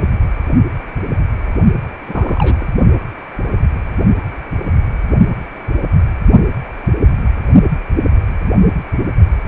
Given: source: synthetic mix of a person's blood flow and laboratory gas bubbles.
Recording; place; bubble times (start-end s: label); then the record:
Doppler ultrasound of blood flow; precordium
2.08-2.65 s: bubbles
From the record:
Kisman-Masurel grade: 212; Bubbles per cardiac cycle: several, 3 to 8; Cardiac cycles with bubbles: 1 to 10%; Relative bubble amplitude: moderate (0.250 to 0.450); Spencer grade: 1 (occasional bubble signal discernible with the cardiac motion signal, with majority of cardiac periods free of bubbles); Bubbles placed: only in the low amplitude regions of the cardiac cycle